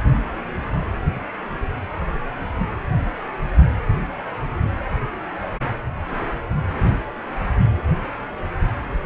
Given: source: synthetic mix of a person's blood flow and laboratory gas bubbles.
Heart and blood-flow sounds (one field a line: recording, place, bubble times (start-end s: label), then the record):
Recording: Doppler ultrasound of blood flow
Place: precordium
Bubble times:
no bubbles
From the record:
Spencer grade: 0 (complete lack of bubble signals)